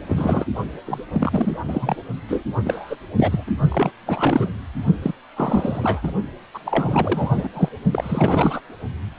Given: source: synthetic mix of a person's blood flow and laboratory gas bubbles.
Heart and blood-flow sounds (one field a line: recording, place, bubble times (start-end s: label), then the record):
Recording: Doppler ultrasound of blood flow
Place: precordium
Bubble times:
0.08-0.45 s: bubbles
0.86-1.02 s: bubbles
1.13-1.57 s: bubbles
1.65-1.97 s: bubbles
2.28-2.43 s: bubbles
2.65-2.96 s: bubbles
3.17-3.51 s: bubbles
3.70-3.91 s: bubbles
4.06-4.53 s: bubbles
5.02-5.12 s: bubbles
5.36-6.11 s: bubbles
6.54-6.59 s: bubbles
6.65-7.49 s: bubbles
7.54-7.69 s: bubbles
7.93-8.61 s: bubbles
From the record:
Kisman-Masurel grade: 342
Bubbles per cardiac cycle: rolling drumbeat, 9 or more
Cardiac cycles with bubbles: 100%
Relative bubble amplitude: moderate (0.250 to 0.450)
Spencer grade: 3 (all of the cardiac periods contain showers or single bubble signals, but not dominating or overriding the cardiac motion signals)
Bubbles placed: only in the low amplitude regions of the cardiac cycle